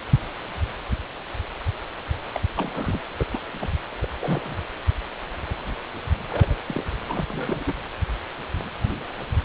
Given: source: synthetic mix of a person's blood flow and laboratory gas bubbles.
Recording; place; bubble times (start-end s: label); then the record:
Doppler ultrasound of blood flow; precordium
2.35-2.41 s: bubbles
2.56-2.99 s: bubbles
3.18-3.27 s: bubbles
3.32-3.39 s: bubbles
3.53-3.67 s: bubbles
4.01-4.08 s: bubbles
4.21-4.54 s: bubbles
6.28-6.56 s: bubbles
6.66-6.83 s: bubbles
7.08-7.25 s: bubbles
7.29-7.73 s: bubbles
From the record:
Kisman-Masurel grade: 221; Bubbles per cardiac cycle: several, 3 to 8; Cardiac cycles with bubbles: 10 to 50%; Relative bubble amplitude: barely perceptible (0.100 to 0.250); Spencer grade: 2 (many but less than half of the cardiac periods contain bubble signals, singularly or in groups); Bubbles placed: anywhere in the cardiac cycle